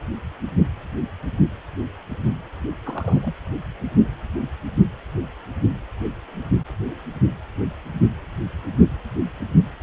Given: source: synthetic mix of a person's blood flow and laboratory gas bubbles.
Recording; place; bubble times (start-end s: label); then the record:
Doppler ultrasound of blood flow; precordium
2.84-3.33 s: bubbles
From the record:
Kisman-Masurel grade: 211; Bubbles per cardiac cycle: several, 3 to 8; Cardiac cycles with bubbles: 1 to 10%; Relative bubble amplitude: barely perceptible (0.100 to 0.250); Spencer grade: 1 (occasional bubble signal discernible with the cardiac motion signal, with majority of cardiac periods free of bubbles); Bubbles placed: anywhere in the cardiac cycle